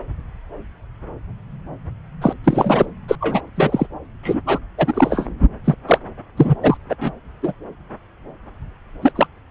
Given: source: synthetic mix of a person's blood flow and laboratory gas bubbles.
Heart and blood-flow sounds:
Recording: Doppler ultrasound of blood flow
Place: subclavian vein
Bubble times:
2.21-2.34 s: bubbles
2.44-2.86 s: bubbles
3.08-3.16 s: bubbles
3.20-3.41 s: bubbles
3.55-3.87 s: bubbles
4.22-4.41 s: bubbles
4.46-4.58 s: bubbles
4.77-5.26 s: bubbles
5.64-5.75 s: bubbles
5.87-5.99 s: bubbles
6.37-6.54 s: bubbles
6.62-6.77 s: bubbles
6.89-6.95 s: bubbles
7.01-7.12 s: bubbles
7.42-7.54 s: bubbles
9.02-9.12 s: bubbles
9.16-9.27 s: bubbles
From the record:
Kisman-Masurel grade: 233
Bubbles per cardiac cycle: several, 3 to 8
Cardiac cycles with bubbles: 50 to 99%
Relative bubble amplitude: loud (0.450 to 0.775)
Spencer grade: 3 (all of the cardiac periods contain showers or single bubble signals, but not dominating or overriding the cardiac motion signals)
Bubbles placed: anywhere in the cardiac cycle

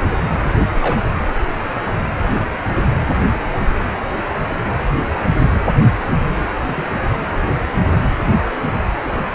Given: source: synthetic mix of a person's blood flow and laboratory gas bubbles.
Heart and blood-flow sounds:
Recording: Doppler ultrasound of blood flow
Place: precordium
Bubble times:
0.81-1.27 s: bubbles
2.67-2.74 s: bubbles
6.67-6.91 s: bubbles
From the record:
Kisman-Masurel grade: 121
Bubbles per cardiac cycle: 1 to 2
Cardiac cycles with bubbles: 10 to 50%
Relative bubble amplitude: barely perceptible (0.100 to 0.250)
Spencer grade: 2 (many but less than half of the cardiac periods contain bubble signals, singularly or in groups)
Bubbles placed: anywhere in the cardiac cycle

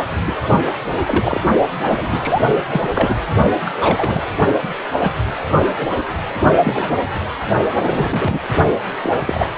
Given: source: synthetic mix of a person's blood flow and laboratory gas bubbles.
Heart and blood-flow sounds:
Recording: Doppler ultrasound of blood flow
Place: precordium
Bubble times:
0.26-0.34 s: bubbles
1.06-1.40 s: bubbles
1.85-2.43 s: bubbles
2.70-2.90 s: bubbles
2.94-3.15 s: bubbles
3.66-4.23 s: bubbles
4.62-4.69 s: bubbles
5.02-5.12 s: bubbles
5.58-5.66 s: bubbles
5.77-5.86 s: bubbles
5.89-6.02 s: bubbles
6.64-6.97 s: bubbles
7.75-8.40 s: bubbles
9.02-9.21 s: bubbles
9.25-9.46 s: bubbles
From the record:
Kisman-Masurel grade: 242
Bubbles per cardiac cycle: several, 3 to 8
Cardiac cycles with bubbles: 100%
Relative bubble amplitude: moderate (0.250 to 0.450)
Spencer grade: 3 (all of the cardiac periods contain showers or single bubble signals, but not dominating or overriding the cardiac motion signals)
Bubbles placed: only in the low amplitude regions of the cardiac cycle

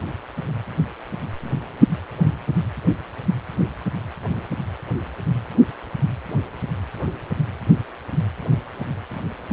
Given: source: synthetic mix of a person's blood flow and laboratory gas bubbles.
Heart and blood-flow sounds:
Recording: Doppler ultrasound of blood flow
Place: precordium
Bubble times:
no bubbles
From the record:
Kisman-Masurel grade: 000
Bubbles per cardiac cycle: 0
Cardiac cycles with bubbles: 0%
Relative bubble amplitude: no bubbles discernible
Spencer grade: 0 (complete lack of bubble signals)

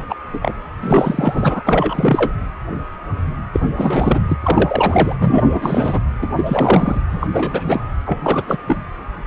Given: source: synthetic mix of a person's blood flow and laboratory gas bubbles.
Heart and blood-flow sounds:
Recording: Doppler ultrasound of blood flow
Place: precordium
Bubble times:
0.00-0.06 s: bubbles
0.09-0.15 s: bubbles
0.33-0.54 s: bubbles
0.79-1.63 s: bubbles
1.66-2.33 s: bubbles
3.53-3.60 s: bubbles
3.73-4.20 s: bubbles
4.28-4.38 s: bubbles
4.42-5.15 s: bubbles
5.21-6.00 s: bubbles
6.21-6.29 s: bubbles
6.36-7.01 s: bubbles
7.11-7.27 s: bubbles
7.32-7.88 s: bubbles
8.06-8.20 s: bubbles
8.23-8.57 s: bubbles
8.66-8.84 s: bubbles
From the record:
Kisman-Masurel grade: 333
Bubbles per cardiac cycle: rolling drumbeat, 9 or more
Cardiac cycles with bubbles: 50 to 99%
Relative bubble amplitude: loud (0.450 to 0.775)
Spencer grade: 3 (all of the cardiac periods contain showers or single bubble signals, but not dominating or overriding the cardiac motion signals)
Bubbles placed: anywhere in the cardiac cycle

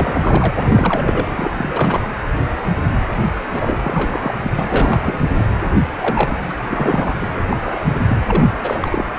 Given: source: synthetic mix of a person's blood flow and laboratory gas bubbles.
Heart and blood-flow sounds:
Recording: Doppler ultrasound of blood flow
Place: precordium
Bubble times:
0.00-0.54 s: bubbles
0.57-1.27 s: bubbles
1.35-2.00 s: bubbles
3.49-4.35 s: bubbles
4.44-4.52 s: bubbles
4.58-5.28 s: bubbles
5.35-5.52 s: bubbles
5.96-6.54 s: bubbles
6.69-7.18 s: bubbles
7.22-7.28 s: bubbles
7.50-7.80 s: bubbles
7.99-8.05 s: bubbles
8.07-8.23 s: bubbles
8.26-8.44 s: bubbles
8.60-9.04 s: bubbles
From the record:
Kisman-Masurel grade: 332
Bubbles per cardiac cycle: rolling drumbeat, 9 or more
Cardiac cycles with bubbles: 50 to 99%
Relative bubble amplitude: moderate (0.250 to 0.450)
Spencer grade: 3 (all of the cardiac periods contain showers or single bubble signals, but not dominating or overriding the cardiac motion signals)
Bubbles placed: anywhere in the cardiac cycle

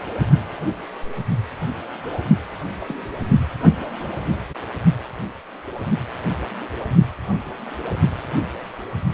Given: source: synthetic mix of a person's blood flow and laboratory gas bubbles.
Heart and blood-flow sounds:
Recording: Doppler ultrasound of blood flow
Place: precordium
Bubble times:
2.79-2.96 s: bubbles
7.66-7.70 s: bubbles
From the record:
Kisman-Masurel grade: 121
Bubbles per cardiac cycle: 1 to 2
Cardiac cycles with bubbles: 10 to 50%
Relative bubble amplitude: barely perceptible (0.100 to 0.250)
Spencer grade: 2 (many but less than half of the cardiac periods contain bubble signals, singularly or in groups)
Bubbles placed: only in the low amplitude regions of the cardiac cycle

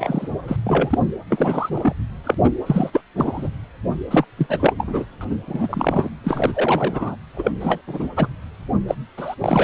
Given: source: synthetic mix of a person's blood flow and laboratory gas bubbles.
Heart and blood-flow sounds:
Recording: Doppler ultrasound of blood flow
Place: precordium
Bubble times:
0.00-0.28 s: bubbles
0.47-0.56 s: bubbles
0.64-0.98 s: bubbles
1.30-1.93 s: bubbles
2.24-2.35 s: bubbles
2.44-2.49 s: bubbles
2.66-2.90 s: bubbles
2.93-3.01 s: bubbles
3.16-3.49 s: bubbles
4.10-4.25 s: bubbles
4.37-4.73 s: bubbles
4.79-5.05 s: bubbles
5.21-5.25 s: bubbles
5.29-5.36 s: bubbles
5.46-6.09 s: bubbles
6.24-7.15 s: bubbles
7.36-7.51 s: bubbles
7.60-7.81 s: bubbles
7.88-8.09 s: bubbles
8.16-8.29 s: bubbles
8.88-8.95 s: bubbles
9.17-9.35 s: bubbles
9.40-9.64 s: bubbles
From the record:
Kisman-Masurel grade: 342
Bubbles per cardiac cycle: rolling drumbeat, 9 or more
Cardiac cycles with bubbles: 100%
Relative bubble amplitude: moderate (0.250 to 0.450)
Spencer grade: 3 (all of the cardiac periods contain showers or single bubble signals, but not dominating or overriding the cardiac motion signals)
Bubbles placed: anywhere in the cardiac cycle

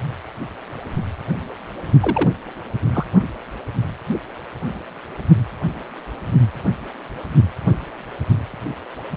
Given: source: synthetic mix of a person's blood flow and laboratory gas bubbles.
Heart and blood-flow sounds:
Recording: Doppler ultrasound of blood flow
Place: precordium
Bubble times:
2.00-2.30 s: bubbles
2.94-3.06 s: bubbles
From the record:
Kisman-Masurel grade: 112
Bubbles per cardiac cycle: 1 to 2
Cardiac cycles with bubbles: 1 to 10%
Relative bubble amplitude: moderate (0.250 to 0.450)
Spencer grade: 1 (occasional bubble signal discernible with the cardiac motion signal, with majority of cardiac periods free of bubbles)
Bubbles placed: only in the low amplitude regions of the cardiac cycle

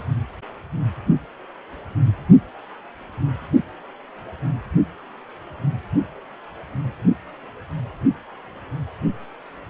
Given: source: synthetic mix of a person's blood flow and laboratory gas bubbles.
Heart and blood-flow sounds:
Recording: Doppler ultrasound of blood flow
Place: precordium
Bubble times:
0.00-0.04 s: bubbles
From the record:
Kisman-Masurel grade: 213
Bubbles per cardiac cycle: several, 3 to 8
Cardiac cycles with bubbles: 1 to 10%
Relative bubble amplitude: loud (0.450 to 0.775)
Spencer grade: 1 (occasional bubble signal discernible with the cardiac motion signal, with majority of cardiac periods free of bubbles)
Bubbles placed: only in the low amplitude regions of the cardiac cycle

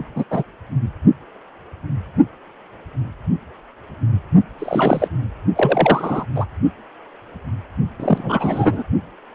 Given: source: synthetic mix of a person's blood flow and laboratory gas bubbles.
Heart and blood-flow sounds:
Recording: Doppler ultrasound of blood flow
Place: precordium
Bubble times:
0.16-0.24 s: bubbles
0.30-0.43 s: bubbles
4.58-5.08 s: bubbles
5.56-6.25 s: bubbles
6.35-6.46 s: bubbles
8.00-8.83 s: bubbles
From the record:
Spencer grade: 3 (all of the cardiac periods contain showers or single bubble signals, but not dominating or overriding the cardiac motion signals)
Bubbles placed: only in the low amplitude regions of the cardiac cycle

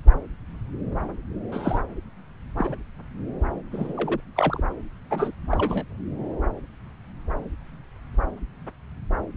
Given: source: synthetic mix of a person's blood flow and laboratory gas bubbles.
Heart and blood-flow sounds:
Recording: Doppler ultrasound of blood flow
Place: subclavian vein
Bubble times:
1.52-1.81 s: bubbles
2.57-2.75 s: bubbles
3.71-3.94 s: bubbles
3.97-4.21 s: bubbles
4.36-4.62 s: bubbles
5.10-5.32 s: bubbles
5.52-5.85 s: bubbles
From the record:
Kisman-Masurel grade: 222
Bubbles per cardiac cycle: several, 3 to 8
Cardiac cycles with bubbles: 10 to 50%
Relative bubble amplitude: moderate (0.250 to 0.450)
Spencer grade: 2 (many but less than half of the cardiac periods contain bubble signals, singularly or in groups)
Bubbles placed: anywhere in the cardiac cycle

